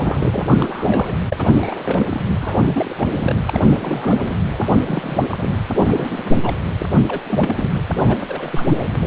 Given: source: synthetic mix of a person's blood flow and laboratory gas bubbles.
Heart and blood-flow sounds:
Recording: Doppler ultrasound of blood flow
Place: precordium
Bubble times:
0.00-0.27 s: bubbles
0.32-1.15 s: bubbles
1.29-2.20 s: bubbles
2.40-2.95 s: bubbles
2.98-3.38 s: bubbles
3.46-4.38 s: bubbles
4.51-4.71 s: bubbles
4.86-5.50 s: bubbles
5.79-6.38 s: bubbles
6.43-6.56 s: bubbles
6.78-7.00 s: bubbles
7.08-7.21 s: bubbles
7.28-7.70 s: bubbles
7.95-8.73 s: bubbles
From the record:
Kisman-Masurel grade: 342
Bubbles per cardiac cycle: rolling drumbeat, 9 or more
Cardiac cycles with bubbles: 100%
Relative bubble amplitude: moderate (0.250 to 0.450)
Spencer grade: 3 (all of the cardiac periods contain showers or single bubble signals, but not dominating or overriding the cardiac motion signals)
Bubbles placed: anywhere in the cardiac cycle

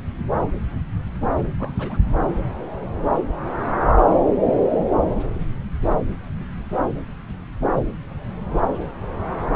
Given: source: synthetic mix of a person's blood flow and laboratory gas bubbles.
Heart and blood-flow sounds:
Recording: Doppler ultrasound of blood flow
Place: subclavian vein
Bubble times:
1.58-1.99 s: bubbles
3.68-3.92 s: bubbles
From the record:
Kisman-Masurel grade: 111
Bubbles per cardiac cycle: 1 to 2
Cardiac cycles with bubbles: 1 to 10%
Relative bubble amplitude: barely perceptible (0.100 to 0.250)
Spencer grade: 1 (occasional bubble signal discernible with the cardiac motion signal, with majority of cardiac periods free of bubbles)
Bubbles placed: anywhere in the cardiac cycle

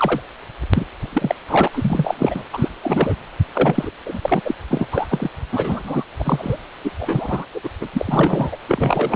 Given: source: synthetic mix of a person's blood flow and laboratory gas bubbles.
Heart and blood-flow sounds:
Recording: Doppler ultrasound of blood flow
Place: precordium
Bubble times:
0.00-0.21 s: bubbles
0.73-0.87 s: bubbles
1.00-1.35 s: bubbles
1.48-1.68 s: bubbles
1.72-2.43 s: bubbles
2.52-2.69 s: bubbles
2.83-3.15 s: bubbles
3.53-3.92 s: bubbles
4.05-4.40 s: bubbles
4.44-4.54 s: bubbles
4.68-4.88 s: bubbles
4.91-5.30 s: bubbles
5.51-6.03 s: bubbles
6.19-6.57 s: bubbles
6.84-6.91 s: bubbles
6.98-7.46 s: bubbles
7.54-7.69 s: bubbles
7.80-7.87 s: bubbles
7.93-8.57 s: bubbles
8.68-9.16 s: bubbles
From the record:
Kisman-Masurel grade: 343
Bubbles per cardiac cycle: rolling drumbeat, 9 or more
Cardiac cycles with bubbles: 100%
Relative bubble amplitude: loud (0.450 to 0.775)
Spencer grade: 3 (all of the cardiac periods contain showers or single bubble signals, but not dominating or overriding the cardiac motion signals)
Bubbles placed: anywhere in the cardiac cycle

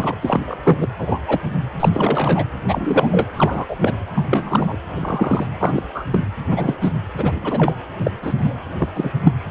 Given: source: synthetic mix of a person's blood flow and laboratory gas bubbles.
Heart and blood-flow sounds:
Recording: Doppler ultrasound of blood flow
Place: precordium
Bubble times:
0.00-0.16 s: bubbles
0.21-0.57 s: bubbles
0.64-0.87 s: bubbles
0.98-1.21 s: bubbles
1.27-1.40 s: bubbles
1.79-1.89 s: bubbles
1.92-2.48 s: bubbles
2.67-3.28 s: bubbles
3.33-3.76 s: bubbles
3.82-3.94 s: bubbles
4.13-4.25 s: bubbles
4.29-4.76 s: bubbles
4.95-5.46 s: bubbles
5.60-5.87 s: bubbles
5.94-6.04 s: bubbles
6.11-6.22 s: bubbles
6.49-6.75 s: bubbles
6.81-6.89 s: bubbles
7.17-7.38 s: bubbles
7.42-7.75 s: bubbles
7.99-8.11 s: bubbles
8.21-8.33 s: bubbles
8.38-8.54 s: bubbles
8.78-8.88 s: bubbles
8.94-9.11 s: bubbles
9.23-9.31 s: bubbles
9.49-9.51 s: bubbles
From the record:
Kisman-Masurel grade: 243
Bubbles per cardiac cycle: several, 3 to 8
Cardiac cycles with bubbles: 100%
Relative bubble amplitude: loud (0.450 to 0.775)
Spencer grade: 3 (all of the cardiac periods contain showers or single bubble signals, but not dominating or overriding the cardiac motion signals)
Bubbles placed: anywhere in the cardiac cycle

